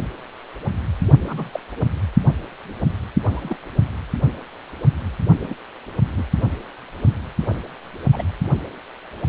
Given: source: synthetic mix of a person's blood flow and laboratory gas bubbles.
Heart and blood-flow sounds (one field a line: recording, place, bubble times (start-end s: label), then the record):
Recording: Doppler ultrasound of blood flow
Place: precordium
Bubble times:
1.27-1.49 s: bubbles
1.53-1.59 s: bubbles
3.25-3.57 s: bubbles
5.43-5.55 s: bubbles
6.17-6.24 s: bubbles
7.40-7.60 s: bubbles
8.12-8.23 s: bubbles
From the record:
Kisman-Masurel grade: 121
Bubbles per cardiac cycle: 1 to 2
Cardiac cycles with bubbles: 10 to 50%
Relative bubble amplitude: barely perceptible (0.100 to 0.250)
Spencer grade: 2 (many but less than half of the cardiac periods contain bubble signals, singularly or in groups)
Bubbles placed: only in the low amplitude regions of the cardiac cycle